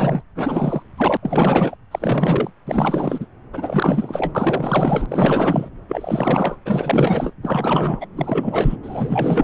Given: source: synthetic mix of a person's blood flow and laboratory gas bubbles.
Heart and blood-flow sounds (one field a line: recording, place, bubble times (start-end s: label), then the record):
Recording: Doppler ultrasound of blood flow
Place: subclavian vein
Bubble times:
0.00-0.24 s: bubbles
0.35-0.83 s: bubbles
0.96-1.17 s: bubbles
1.22-1.75 s: bubbles
1.91-2.50 s: bubbles
2.67-3.27 s: bubbles
3.53-4.33 s: bubbles
4.35-5.69 s: bubbles
5.88-6.56 s: bubbles
6.65-7.33 s: bubbles
7.42-8.06 s: bubbles
8.16-8.76 s: bubbles
8.82-9.44 s: bubbles
From the record:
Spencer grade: 4 (maximum detectable bubble signal sounding continuously throughout systole and diastole of every cardiac period, and overriding the amplitude of the normal cardiac signals)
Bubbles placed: anywhere in the cardiac cycle